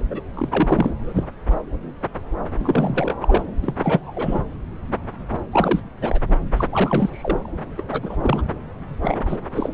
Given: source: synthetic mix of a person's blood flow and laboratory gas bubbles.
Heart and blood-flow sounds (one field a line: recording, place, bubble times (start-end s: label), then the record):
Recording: Doppler ultrasound of blood flow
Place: subclavian vein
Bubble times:
0.00-0.07 s: bubbles
0.10-0.21 s: bubbles
0.33-0.93 s: bubbles
1.04-1.27 s: bubbles
2.60-3.15 s: bubbles
3.21-3.44 s: bubbles
3.62-3.74 s: bubbles
3.83-4.42 s: bubbles
5.51-5.83 s: bubbles
6.00-6.20 s: bubbles
6.56-6.67 s: bubbles
6.71-7.50 s: bubbles
7.78-7.83 s: bubbles
7.92-8.17 s: bubbles
8.21-8.42 s: bubbles
9.01-9.41 s: bubbles
9.53-9.74 s: bubbles
From the record:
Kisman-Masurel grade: 332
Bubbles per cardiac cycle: rolling drumbeat, 9 or more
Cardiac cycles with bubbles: 50 to 99%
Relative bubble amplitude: moderate (0.250 to 0.450)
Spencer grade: 3 (all of the cardiac periods contain showers or single bubble signals, but not dominating or overriding the cardiac motion signals)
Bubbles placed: anywhere in the cardiac cycle